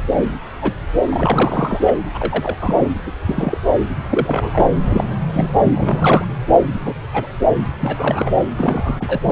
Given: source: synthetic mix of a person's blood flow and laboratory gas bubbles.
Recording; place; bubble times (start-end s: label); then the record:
Doppler ultrasound of blood flow; subclavian vein
0.13-0.33 s: bubbles
0.61-0.74 s: bubbles
1.10-1.80 s: bubbles
1.82-1.95 s: bubbles
2.13-2.55 s: bubbles
2.61-2.89 s: bubbles
3.05-3.11 s: bubbles
3.26-3.58 s: bubbles
3.96-4.71 s: bubbles
4.85-5.04 s: bubbles
5.33-5.52 s: bubbles
5.60-6.25 s: bubbles
6.84-6.93 s: bubbles
7.13-7.26 s: bubbles
7.58-7.66 s: bubbles
7.80-8.32 s: bubbles
8.58-9.32 s: bubbles
From the record:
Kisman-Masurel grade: 242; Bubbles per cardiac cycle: several, 3 to 8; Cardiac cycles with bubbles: 100%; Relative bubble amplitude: moderate (0.250 to 0.450); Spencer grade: 3 (all of the cardiac periods contain showers or single bubble signals, but not dominating or overriding the cardiac motion signals); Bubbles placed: anywhere in the cardiac cycle